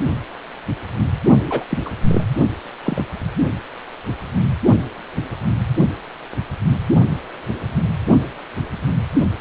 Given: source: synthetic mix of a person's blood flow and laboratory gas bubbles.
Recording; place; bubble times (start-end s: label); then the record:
Doppler ultrasound of blood flow; precordium
1.46-1.64 s: bubbles
1.69-1.78 s: bubbles
1.85-1.89 s: bubbles
2.07-2.23 s: bubbles
2.85-3.04 s: bubbles
From the record:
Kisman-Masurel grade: 212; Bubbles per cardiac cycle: several, 3 to 8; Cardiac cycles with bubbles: 1 to 10%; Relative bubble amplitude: moderate (0.250 to 0.450); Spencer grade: 1 (occasional bubble signal discernible with the cardiac motion signal, with majority of cardiac periods free of bubbles); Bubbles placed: only in the low amplitude regions of the cardiac cycle